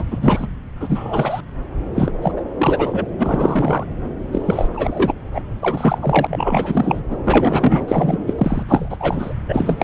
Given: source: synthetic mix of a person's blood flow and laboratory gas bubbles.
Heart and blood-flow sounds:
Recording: Doppler ultrasound of blood flow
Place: subclavian vein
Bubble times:
0.00-0.04 s: bubbles
0.10-0.48 s: bubbles
0.80-1.40 s: bubbles
1.94-2.12 s: bubbles
2.22-2.31 s: bubbles
2.36-2.43 s: bubbles
2.58-3.05 s: bubbles
3.18-3.85 s: bubbles
4.32-4.69 s: bubbles
4.74-5.13 s: bubbles
5.33-5.41 s: bubbles
5.61-5.98 s: bubbles
6.02-7.01 s: bubbles
7.10-7.17 s: bubbles
7.24-8.33 s: bubbles
8.38-8.63 s: bubbles
8.69-9.34 s: bubbles
9.48-9.84 s: bubbles
From the record:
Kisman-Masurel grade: 343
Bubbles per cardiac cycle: rolling drumbeat, 9 or more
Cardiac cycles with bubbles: 100%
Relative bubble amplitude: loud (0.450 to 0.775)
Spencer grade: 3 (all of the cardiac periods contain showers or single bubble signals, but not dominating or overriding the cardiac motion signals)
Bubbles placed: anywhere in the cardiac cycle

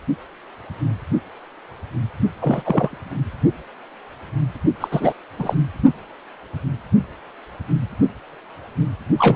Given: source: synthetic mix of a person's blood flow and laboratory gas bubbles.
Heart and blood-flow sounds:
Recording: Doppler ultrasound of blood flow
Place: precordium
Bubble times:
2.40-2.98 s: bubbles
4.80-4.88 s: bubbles
4.91-5.13 s: bubbles
5.38-5.55 s: bubbles
9.18-9.36 s: bubbles
From the record:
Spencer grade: 2 (many but less than half of the cardiac periods contain bubble signals, singularly or in groups)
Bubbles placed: only in the low amplitude regions of the cardiac cycle

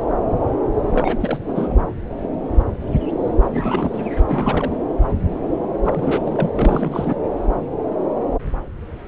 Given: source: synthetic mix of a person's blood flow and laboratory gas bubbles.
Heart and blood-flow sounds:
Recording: Doppler ultrasound of blood flow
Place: subclavian vein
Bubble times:
0.92-1.39 s: bubbles
1.47-1.74 s: bubbles
3.42-3.48 s: bubbles
3.53-4.10 s: bubbles
4.29-4.75 s: bubbles
5.84-6.52 s: bubbles
6.55-7.21 s: bubbles
From the record:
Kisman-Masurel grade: 332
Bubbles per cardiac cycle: rolling drumbeat, 9 or more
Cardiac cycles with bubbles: 50 to 99%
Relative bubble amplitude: moderate (0.250 to 0.450)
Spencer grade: 3 (all of the cardiac periods contain showers or single bubble signals, but not dominating or overriding the cardiac motion signals)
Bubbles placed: anywhere in the cardiac cycle

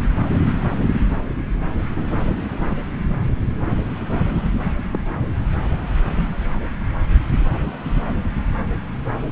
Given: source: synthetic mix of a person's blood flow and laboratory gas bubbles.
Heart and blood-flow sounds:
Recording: Doppler ultrasound of blood flow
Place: subclavian vein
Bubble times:
4.93-5.00 s: bubbles
From the record:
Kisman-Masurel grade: 112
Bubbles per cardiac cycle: 1 to 2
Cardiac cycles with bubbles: 1 to 10%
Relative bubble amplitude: moderate (0.250 to 0.450)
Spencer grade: 1 (occasional bubble signal discernible with the cardiac motion signal, with majority of cardiac periods free of bubbles)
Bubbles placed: anywhere in the cardiac cycle

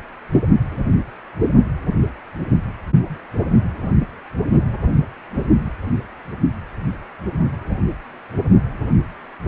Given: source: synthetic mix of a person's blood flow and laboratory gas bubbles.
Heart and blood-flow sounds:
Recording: Doppler ultrasound of blood flow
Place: precordium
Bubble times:
0.32-0.40 s: bubbles
From the record:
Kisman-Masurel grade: 122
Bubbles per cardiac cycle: 1 to 2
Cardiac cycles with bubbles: 10 to 50%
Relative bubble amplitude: moderate (0.250 to 0.450)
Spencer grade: 2 (many but less than half of the cardiac periods contain bubble signals, singularly or in groups)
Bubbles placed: only in the low amplitude regions of the cardiac cycle

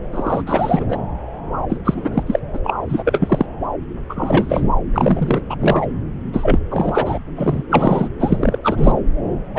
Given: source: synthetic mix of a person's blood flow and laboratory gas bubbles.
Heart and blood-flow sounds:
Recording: Doppler ultrasound of blood flow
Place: subclavian vein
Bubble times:
0.12-0.43 s: bubbles
0.46-0.86 s: bubbles
0.89-0.99 s: bubbles
1.68-1.77 s: bubbles
1.84-2.23 s: bubbles
2.26-2.40 s: bubbles
2.53-2.58 s: bubbles
2.63-2.74 s: bubbles
2.89-3.46 s: bubbles
4.08-4.64 s: bubbles
4.94-5.41 s: bubbles
5.50-5.56 s: bubbles
5.61-5.86 s: bubbles
6.33-6.58 s: bubbles
6.70-7.18 s: bubbles
7.36-7.64 s: bubbles
7.69-8.08 s: bubbles
8.18-8.59 s: bubbles
8.63-9.00 s: bubbles
9.55-9.59 s: bubbles
From the record:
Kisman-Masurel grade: 343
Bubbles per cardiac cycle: rolling drumbeat, 9 or more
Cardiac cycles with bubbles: 100%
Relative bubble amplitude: loud (0.450 to 0.775)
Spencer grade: 3 (all of the cardiac periods contain showers or single bubble signals, but not dominating or overriding the cardiac motion signals)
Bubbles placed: anywhere in the cardiac cycle

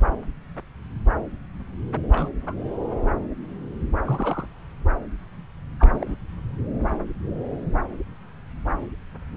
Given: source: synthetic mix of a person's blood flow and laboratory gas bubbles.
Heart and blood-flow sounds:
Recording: Doppler ultrasound of blood flow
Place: subclavian vein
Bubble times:
2.12-2.29 s: bubbles
2.46-2.54 s: bubbles
4.05-4.47 s: bubbles
5.79-6.17 s: bubbles
From the record:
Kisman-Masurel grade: 222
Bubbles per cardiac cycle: several, 3 to 8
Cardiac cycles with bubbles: 10 to 50%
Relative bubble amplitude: moderate (0.250 to 0.450)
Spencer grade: 2 (many but less than half of the cardiac periods contain bubble signals, singularly or in groups)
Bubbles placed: anywhere in the cardiac cycle

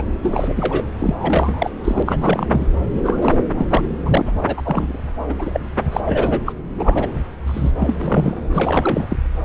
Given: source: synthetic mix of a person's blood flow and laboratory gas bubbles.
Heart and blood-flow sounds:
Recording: Doppler ultrasound of blood flow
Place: subclavian vein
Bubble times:
0.00-0.03 s: bubbles
0.22-0.53 s: bubbles
0.56-0.88 s: bubbles
0.99-1.15 s: bubbles
1.20-1.70 s: bubbles
1.84-2.03 s: bubbles
2.05-2.67 s: bubbles
3.03-3.38 s: bubbles
3.58-3.66 s: bubbles
3.70-3.81 s: bubbles
4.05-4.32 s: bubbles
4.46-4.98 s: bubbles
5.29-5.60 s: bubbles
5.92-6.00 s: bubbles
6.04-6.42 s: bubbles
6.46-6.52 s: bubbles
6.78-7.08 s: bubbles
7.46-7.71 s: bubbles
7.78-7.96 s: bubbles
8.00-8.37 s: bubbles
8.54-9.16 s: bubbles
From the record:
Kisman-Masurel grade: 342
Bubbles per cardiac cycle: rolling drumbeat, 9 or more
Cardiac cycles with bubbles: 100%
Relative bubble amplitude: moderate (0.250 to 0.450)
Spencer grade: 3 (all of the cardiac periods contain showers or single bubble signals, but not dominating or overriding the cardiac motion signals)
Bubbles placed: anywhere in the cardiac cycle

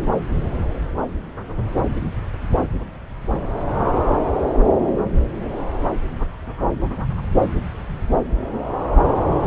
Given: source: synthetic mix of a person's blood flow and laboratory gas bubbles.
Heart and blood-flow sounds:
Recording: Doppler ultrasound of blood flow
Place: subclavian vein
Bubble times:
no bubbles
From the record:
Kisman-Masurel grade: 000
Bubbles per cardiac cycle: 0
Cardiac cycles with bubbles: 0%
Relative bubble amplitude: no bubbles discernible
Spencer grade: 0 (complete lack of bubble signals)

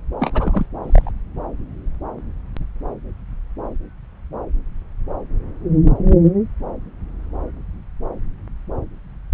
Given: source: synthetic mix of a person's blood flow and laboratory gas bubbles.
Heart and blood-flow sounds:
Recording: Doppler ultrasound of blood flow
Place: subclavian vein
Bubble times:
0.20-0.66 s: bubbles
0.83-1.11 s: bubbles
From the record:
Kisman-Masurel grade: 212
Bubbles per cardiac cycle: several, 3 to 8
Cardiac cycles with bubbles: 1 to 10%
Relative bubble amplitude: moderate (0.250 to 0.450)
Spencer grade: 1 (occasional bubble signal discernible with the cardiac motion signal, with majority of cardiac periods free of bubbles)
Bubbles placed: anywhere in the cardiac cycle

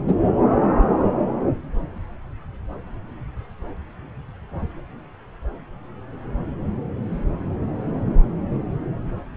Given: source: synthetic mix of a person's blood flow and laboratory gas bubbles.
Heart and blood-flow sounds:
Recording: Doppler ultrasound of blood flow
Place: subclavian vein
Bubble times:
0.08-0.14 s: bubbles
From the record:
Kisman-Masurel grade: 213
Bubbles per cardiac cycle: several, 3 to 8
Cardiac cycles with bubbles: 1 to 10%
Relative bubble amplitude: loud (0.450 to 0.775)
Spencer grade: 1 (occasional bubble signal discernible with the cardiac motion signal, with majority of cardiac periods free of bubbles)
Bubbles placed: anywhere in the cardiac cycle

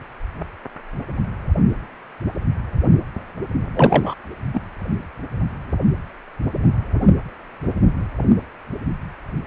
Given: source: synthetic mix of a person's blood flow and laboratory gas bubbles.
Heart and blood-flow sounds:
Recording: Doppler ultrasound of blood flow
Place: precordium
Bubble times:
3.75-4.14 s: bubbles
4.54-4.62 s: bubbles
From the record:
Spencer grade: 1 (occasional bubble signal discernible with the cardiac motion signal, with majority of cardiac periods free of bubbles)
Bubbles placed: anywhere in the cardiac cycle

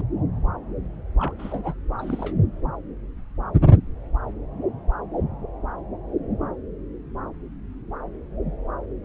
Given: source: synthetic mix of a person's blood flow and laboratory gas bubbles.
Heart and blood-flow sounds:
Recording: Doppler ultrasound of blood flow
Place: subclavian vein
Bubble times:
1.19-1.33 s: bubbles
1.39-1.74 s: bubbles
1.98-2.36 s: bubbles
From the record:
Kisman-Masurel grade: 221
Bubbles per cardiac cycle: several, 3 to 8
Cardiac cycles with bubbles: 10 to 50%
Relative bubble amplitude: barely perceptible (0.100 to 0.250)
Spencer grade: 2 (many but less than half of the cardiac periods contain bubble signals, singularly or in groups)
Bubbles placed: anywhere in the cardiac cycle

